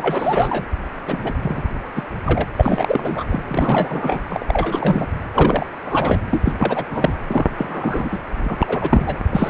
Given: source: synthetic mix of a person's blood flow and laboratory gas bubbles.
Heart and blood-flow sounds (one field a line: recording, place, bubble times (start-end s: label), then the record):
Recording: Doppler ultrasound of blood flow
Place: precordium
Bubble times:
0.00-0.66 s: bubbles
1.07-1.33 s: bubbles
1.42-1.62 s: bubbles
1.95-2.03 s: bubbles
2.24-2.44 s: bubbles
2.58-3.24 s: bubbles
3.29-3.42 s: bubbles
3.46-4.20 s: bubbles
4.30-4.46 s: bubbles
4.48-5.06 s: bubbles
5.34-5.67 s: bubbles
5.85-6.21 s: bubbles
6.31-6.53 s: bubbles
6.58-6.84 s: bubbles
6.89-7.13 s: bubbles
7.27-7.46 s: bubbles
7.58-8.19 s: bubbles
8.44-8.57 s: bubbles
8.61-9.19 s: bubbles
9.29-9.50 s: bubbles
From the record:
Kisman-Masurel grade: 332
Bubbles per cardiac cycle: rolling drumbeat, 9 or more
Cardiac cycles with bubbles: 50 to 99%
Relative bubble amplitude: moderate (0.250 to 0.450)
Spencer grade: 3 (all of the cardiac periods contain showers or single bubble signals, but not dominating or overriding the cardiac motion signals)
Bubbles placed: anywhere in the cardiac cycle